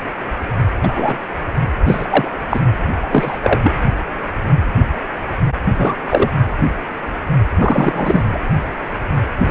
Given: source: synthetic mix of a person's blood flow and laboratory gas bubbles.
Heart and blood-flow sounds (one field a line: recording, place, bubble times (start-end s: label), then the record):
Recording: Doppler ultrasound of blood flow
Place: precordium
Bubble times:
0.82-1.17 s: bubbles
1.87-2.33 s: bubbles
2.50-2.60 s: bubbles
3.02-3.39 s: bubbles
3.43-3.73 s: bubbles
5.77-5.94 s: bubbles
6.10-6.30 s: bubbles
7.58-8.22 s: bubbles
8.33-8.39 s: bubbles
9.44-9.51 s: bubbles
From the record:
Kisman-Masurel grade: 233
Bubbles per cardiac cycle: several, 3 to 8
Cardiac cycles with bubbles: 50 to 99%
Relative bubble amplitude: loud (0.450 to 0.775)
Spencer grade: 3 (all of the cardiac periods contain showers or single bubble signals, but not dominating or overriding the cardiac motion signals)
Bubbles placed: anywhere in the cardiac cycle